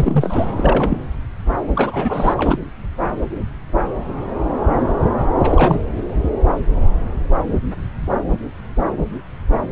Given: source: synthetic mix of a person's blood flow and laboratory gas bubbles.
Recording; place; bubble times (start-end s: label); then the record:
Doppler ultrasound of blood flow; subclavian vein
0.00-0.46 s: bubbles
0.57-1.01 s: bubbles
1.76-2.34 s: bubbles
2.37-2.59 s: bubbles
5.43-5.81 s: bubbles
From the record:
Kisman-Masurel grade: 222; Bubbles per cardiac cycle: several, 3 to 8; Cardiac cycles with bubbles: 10 to 50%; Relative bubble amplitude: moderate (0.250 to 0.450); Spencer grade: 2 (many but less than half of the cardiac periods contain bubble signals, singularly or in groups); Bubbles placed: anywhere in the cardiac cycle